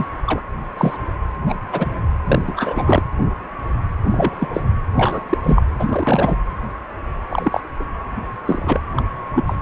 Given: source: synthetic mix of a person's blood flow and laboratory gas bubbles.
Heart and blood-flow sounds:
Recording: Doppler ultrasound of blood flow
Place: precordium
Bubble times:
0.00-0.05 s: bubbles
0.27-0.41 s: bubbles
0.78-0.97 s: bubbles
1.46-1.56 s: bubbles
1.71-1.92 s: bubbles
2.25-2.42 s: bubbles
2.45-3.02 s: bubbles
4.04-4.48 s: bubbles
4.54-4.60 s: bubbles
4.96-5.21 s: bubbles
5.29-5.38 s: bubbles
5.42-5.62 s: bubbles
5.79-6.37 s: bubbles
7.29-7.60 s: bubbles
7.79-7.85 s: bubbles
8.46-8.81 s: bubbles
8.96-9.03 s: bubbles
9.31-9.56 s: bubbles
From the record:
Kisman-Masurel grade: 232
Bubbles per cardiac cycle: several, 3 to 8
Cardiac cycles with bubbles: 50 to 99%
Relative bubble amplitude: moderate (0.250 to 0.450)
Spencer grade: 3 (all of the cardiac periods contain showers or single bubble signals, but not dominating or overriding the cardiac motion signals)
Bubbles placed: anywhere in the cardiac cycle

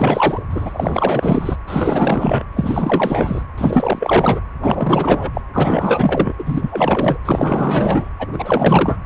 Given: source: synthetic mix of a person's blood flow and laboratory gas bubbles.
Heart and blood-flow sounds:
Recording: Doppler ultrasound of blood flow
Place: precordium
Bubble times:
0.00-0.42 s: bubbles
0.49-1.57 s: bubbles
1.67-2.44 s: bubbles
2.54-3.43 s: bubbles
3.58-4.40 s: bubbles
4.62-5.31 s: bubbles
5.34-5.41 s: bubbles
5.53-6.33 s: bubbles
6.38-7.17 s: bubbles
7.25-8.10 s: bubbles
8.19-8.28 s: bubbles
8.33-8.99 s: bubbles
From the record:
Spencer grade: 4 (maximum detectable bubble signal sounding continuously throughout systole and diastole of every cardiac period, and overriding the amplitude of the normal cardiac signals)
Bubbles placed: anywhere in the cardiac cycle

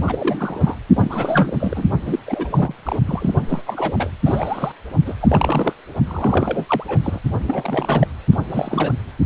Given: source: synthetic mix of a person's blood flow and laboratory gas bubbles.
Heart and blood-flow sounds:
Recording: Doppler ultrasound of blood flow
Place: precordium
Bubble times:
0.06-0.76 s: bubbles
0.96-1.86 s: bubbles
2.06-2.19 s: bubbles
2.26-2.75 s: bubbles
2.78-3.00 s: bubbles
3.05-3.35 s: bubbles
3.48-3.61 s: bubbles
3.66-4.10 s: bubbles
4.25-4.72 s: bubbles
5.06-5.14 s: bubbles
5.21-5.73 s: bubbles
6.06-6.65 s: bubbles
6.68-6.84 s: bubbles
6.88-7.00 s: bubbles
7.04-7.19 s: bubbles
7.47-8.07 s: bubbles
8.31-8.37 s: bubbles
8.49-8.92 s: bubbles
From the record:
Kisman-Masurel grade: 342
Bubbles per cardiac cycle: rolling drumbeat, 9 or more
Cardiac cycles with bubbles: 100%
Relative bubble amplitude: moderate (0.250 to 0.450)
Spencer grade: 3 (all of the cardiac periods contain showers or single bubble signals, but not dominating or overriding the cardiac motion signals)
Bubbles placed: only in the low amplitude regions of the cardiac cycle

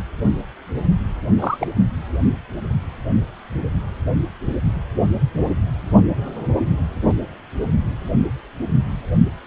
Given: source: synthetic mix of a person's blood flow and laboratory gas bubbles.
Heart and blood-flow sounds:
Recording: Doppler ultrasound of blood flow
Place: precordium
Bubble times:
1.39-1.67 s: bubbles
From the record:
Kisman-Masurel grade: 112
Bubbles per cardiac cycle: 1 to 2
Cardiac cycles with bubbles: 1 to 10%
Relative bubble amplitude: moderate (0.250 to 0.450)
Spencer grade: 1 (occasional bubble signal discernible with the cardiac motion signal, with majority of cardiac periods free of bubbles)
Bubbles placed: only in the low amplitude regions of the cardiac cycle

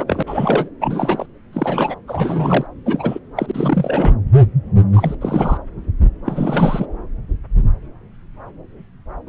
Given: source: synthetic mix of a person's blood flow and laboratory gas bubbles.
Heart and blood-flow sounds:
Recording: Doppler ultrasound of blood flow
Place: subclavian vein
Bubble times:
0.00-0.04 s: bubbles
0.07-0.22 s: bubbles
0.27-0.69 s: bubbles
0.81-1.26 s: bubbles
1.52-1.95 s: bubbles
2.07-2.67 s: bubbles
2.85-3.19 s: bubbles
3.35-4.14 s: bubbles
4.93-5.15 s: bubbles
5.21-5.57 s: bubbles
6.25-6.86 s: bubbles
9.27-9.29 s: bubbles
From the record:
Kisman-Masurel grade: 332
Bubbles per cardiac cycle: rolling drumbeat, 9 or more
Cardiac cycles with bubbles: 50 to 99%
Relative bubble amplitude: moderate (0.250 to 0.450)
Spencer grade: 3 (all of the cardiac periods contain showers or single bubble signals, but not dominating or overriding the cardiac motion signals)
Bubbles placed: anywhere in the cardiac cycle

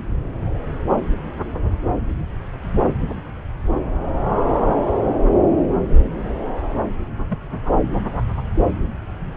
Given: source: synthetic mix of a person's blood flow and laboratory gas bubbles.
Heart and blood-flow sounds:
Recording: Doppler ultrasound of blood flow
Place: subclavian vein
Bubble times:
7.29-7.40 s: bubbles
7.67-7.72 s: bubbles
From the record:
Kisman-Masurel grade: 111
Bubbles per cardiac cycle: 1 to 2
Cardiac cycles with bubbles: 1 to 10%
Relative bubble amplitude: barely perceptible (0.100 to 0.250)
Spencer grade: 1 (occasional bubble signal discernible with the cardiac motion signal, with majority of cardiac periods free of bubbles)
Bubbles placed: anywhere in the cardiac cycle

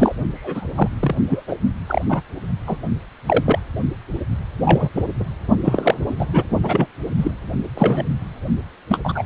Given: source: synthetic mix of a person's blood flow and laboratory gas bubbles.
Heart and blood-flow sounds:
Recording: Doppler ultrasound of blood flow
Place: precordium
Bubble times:
0.00-0.15 s: bubbles
0.34-0.67 s: bubbles
0.75-0.88 s: bubbles
1.00-1.15 s: bubbles
1.29-1.43 s: bubbles
1.47-1.56 s: bubbles
1.87-2.04 s: bubbles
2.08-2.22 s: bubbles
2.67-2.77 s: bubbles
3.26-3.58 s: bubbles
4.62-4.89 s: bubbles
4.94-5.02 s: bubbles
5.19-5.24 s: bubbles
5.64-5.94 s: bubbles
6.19-6.26 s: bubbles
6.32-6.44 s: bubbles
6.63-6.86 s: bubbles
7.17-7.31 s: bubbles
7.74-8.09 s: bubbles
8.88-8.98 s: bubbles
9.04-9.24 s: bubbles
From the record:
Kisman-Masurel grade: 243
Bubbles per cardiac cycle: several, 3 to 8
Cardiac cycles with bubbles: 100%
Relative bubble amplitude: loud (0.450 to 0.775)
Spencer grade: 3 (all of the cardiac periods contain showers or single bubble signals, but not dominating or overriding the cardiac motion signals)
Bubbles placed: only in the low amplitude regions of the cardiac cycle

